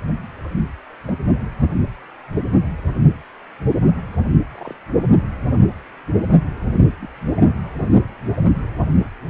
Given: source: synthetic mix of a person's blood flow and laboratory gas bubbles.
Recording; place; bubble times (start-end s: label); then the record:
Doppler ultrasound of blood flow; precordium
1.07-1.14 s: bubbles
4.54-4.75 s: bubbles
7.02-7.08 s: bubbles
7.37-7.50 s: bubbles
From the record:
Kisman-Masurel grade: 121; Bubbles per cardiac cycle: 1 to 2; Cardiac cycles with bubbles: 10 to 50%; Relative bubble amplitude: barely perceptible (0.100 to 0.250); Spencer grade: 2 (many but less than half of the cardiac periods contain bubble signals, singularly or in groups); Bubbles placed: only in the low amplitude regions of the cardiac cycle